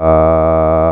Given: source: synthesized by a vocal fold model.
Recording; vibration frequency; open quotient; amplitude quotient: sustained vowel; 80 Hz; 0.5; 1.3